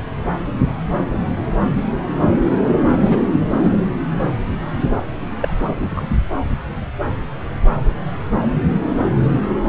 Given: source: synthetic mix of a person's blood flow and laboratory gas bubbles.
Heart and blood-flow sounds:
Doppler ultrasound of blood flow; subclavian vein
2.87-3.21 s: bubbles
3.33-3.40 s: bubbles
3.51-3.81 s: bubbles
5.42-5.54 s: bubbles
5.59-6.05 s: bubbles
From the record:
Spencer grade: 2 (many but less than half of the cardiac periods contain bubble signals, singularly or in groups); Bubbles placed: anywhere in the cardiac cycle

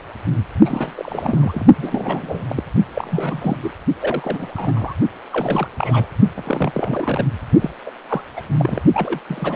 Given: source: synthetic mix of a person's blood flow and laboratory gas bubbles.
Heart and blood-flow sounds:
Doppler ultrasound of blood flow; precordium
0.65-1.66 s: bubbles
1.74-2.63 s: bubbles
2.94-3.57 s: bubbles
3.62-3.72 s: bubbles
3.99-4.95 s: bubbles
5.31-5.67 s: bubbles
5.77-6.15 s: bubbles
6.37-7.25 s: bubbles
7.61-7.70 s: bubbles
7.85-7.91 s: bubbles
8.09-8.21 s: bubbles
8.36-8.41 s: bubbles
8.48-8.54 s: bubbles
8.58-8.79 s: bubbles
8.93-9.18 s: bubbles
9.28-9.56 s: bubbles
From the record:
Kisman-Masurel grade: 342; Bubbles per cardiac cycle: rolling drumbeat, 9 or more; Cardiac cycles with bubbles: 100%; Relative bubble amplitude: moderate (0.250 to 0.450); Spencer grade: 3 (all of the cardiac periods contain showers or single bubble signals, but not dominating or overriding the cardiac motion signals); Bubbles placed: only in the low amplitude regions of the cardiac cycle

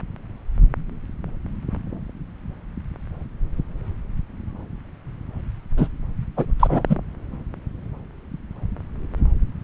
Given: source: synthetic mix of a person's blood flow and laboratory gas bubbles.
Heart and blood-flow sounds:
Doppler ultrasound of blood flow; subclavian vein
5.77-5.88 s: bubbles
6.36-6.45 s: bubbles
6.59-6.96 s: bubbles
From the record:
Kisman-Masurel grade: 213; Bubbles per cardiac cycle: several, 3 to 8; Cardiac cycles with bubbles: 1 to 10%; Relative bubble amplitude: loud (0.450 to 0.775); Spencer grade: 1 (occasional bubble signal discernible with the cardiac motion signal, with majority of cardiac periods free of bubbles); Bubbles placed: anywhere in the cardiac cycle

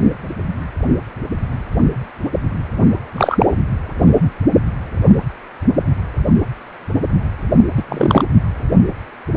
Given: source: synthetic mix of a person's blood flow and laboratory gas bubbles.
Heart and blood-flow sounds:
Doppler ultrasound of blood flow; precordium
3.16-3.46 s: bubbles
7.77-7.82 s: bubbles
7.89-8.23 s: bubbles
From the record:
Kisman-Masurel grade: 213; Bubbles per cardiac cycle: several, 3 to 8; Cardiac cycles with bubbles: 1 to 10%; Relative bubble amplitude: loud (0.450 to 0.775); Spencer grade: 1 (occasional bubble signal discernible with the cardiac motion signal, with majority of cardiac periods free of bubbles); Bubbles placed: anywhere in the cardiac cycle

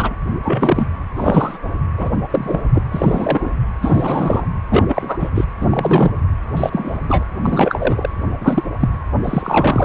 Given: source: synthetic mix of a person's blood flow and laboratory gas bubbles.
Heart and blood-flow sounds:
Doppler ultrasound of blood flow; precordium
0.00-0.15 s: bubbles
0.42-0.87 s: bubbles
1.16-1.58 s: bubbles
1.97-2.10 s: bubbles
2.31-2.61 s: bubbles
2.74-2.83 s: bubbles
2.92-3.50 s: bubbles
3.81-4.45 s: bubbles
4.71-4.86 s: bubbles
4.88-5.30 s: bubbles
5.34-5.45 s: bubbles
5.61-6.11 s: bubbles
6.57-6.99 s: bubbles
7.08-7.26 s: bubbles
7.42-8.09 s: bubbles
8.40-8.63 s: bubbles
8.79-8.88 s: bubbles
9.24-9.85 s: bubbles
From the record:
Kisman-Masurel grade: 243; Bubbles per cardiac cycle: several, 3 to 8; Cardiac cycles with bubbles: 100%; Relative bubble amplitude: loud (0.450 to 0.775); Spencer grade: 3 (all of the cardiac periods contain showers or single bubble signals, but not dominating or overriding the cardiac motion signals); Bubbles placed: anywhere in the cardiac cycle

